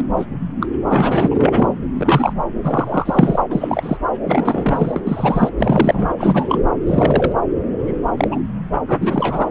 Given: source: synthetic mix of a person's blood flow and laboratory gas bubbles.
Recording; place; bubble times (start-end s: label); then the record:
Doppler ultrasound of blood flow; subclavian vein
0.16-0.26 s: bubbles
0.60-0.66 s: bubbles
0.87-1.68 s: bubbles
1.98-2.33 s: bubbles
2.63-3.42 s: bubbles
3.50-3.97 s: bubbles
4.26-5.49 s: bubbles
5.58-6.13 s: bubbles
6.17-6.63 s: bubbles
6.86-7.32 s: bubbles
7.78-8.01 s: bubbles
8.17-8.38 s: bubbles
8.88-9.49 s: bubbles
From the record:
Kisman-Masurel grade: 243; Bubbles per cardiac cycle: several, 3 to 8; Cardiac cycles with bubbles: 100%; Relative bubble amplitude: loud (0.450 to 0.775); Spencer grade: 3 (all of the cardiac periods contain showers or single bubble signals, but not dominating or overriding the cardiac motion signals); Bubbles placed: anywhere in the cardiac cycle